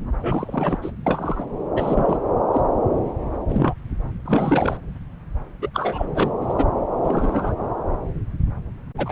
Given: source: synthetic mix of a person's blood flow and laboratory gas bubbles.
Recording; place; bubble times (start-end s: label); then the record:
Doppler ultrasound of blood flow; subclavian vein
0.23-0.79 s: bubbles
0.82-0.91 s: bubbles
1.06-1.47 s: bubbles
1.76-2.17 s: bubbles
2.54-2.61 s: bubbles
3.48-3.75 s: bubbles
4.25-4.77 s: bubbles
5.62-5.69 s: bubbles
5.74-6.06 s: bubbles
6.15-6.31 s: bubbles
6.41-6.65 s: bubbles
7.04-7.54 s: bubbles
8.97-9.11 s: bubbles
From the record:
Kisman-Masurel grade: 232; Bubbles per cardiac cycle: several, 3 to 8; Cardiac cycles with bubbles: 50 to 99%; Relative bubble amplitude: moderate (0.250 to 0.450); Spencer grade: 3 (all of the cardiac periods contain showers or single bubble signals, but not dominating or overriding the cardiac motion signals); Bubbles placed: anywhere in the cardiac cycle